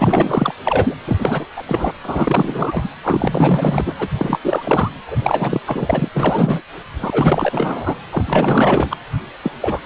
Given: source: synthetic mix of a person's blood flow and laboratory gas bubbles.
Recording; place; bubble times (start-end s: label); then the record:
Doppler ultrasound of blood flow; precordium
0.00-0.54 s: bubbles
0.64-0.95 s: bubbles
1.06-1.46 s: bubbles
1.56-1.63 s: bubbles
1.66-1.93 s: bubbles
2.03-2.89 s: bubbles
3.03-3.93 s: bubbles
3.99-4.08 s: bubbles
4.17-4.40 s: bubbles
4.44-4.91 s: bubbles
5.07-5.61 s: bubbles
5.65-6.08 s: bubbles
6.14-6.62 s: bubbles
7.01-7.96 s: bubbles
8.10-8.97 s: bubbles
9.43-9.51 s: bubbles
9.61-9.80 s: bubbles
From the record:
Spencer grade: 4 (maximum detectable bubble signal sounding continuously throughout systole and diastole of every cardiac period, and overriding the amplitude of the normal cardiac signals); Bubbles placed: anywhere in the cardiac cycle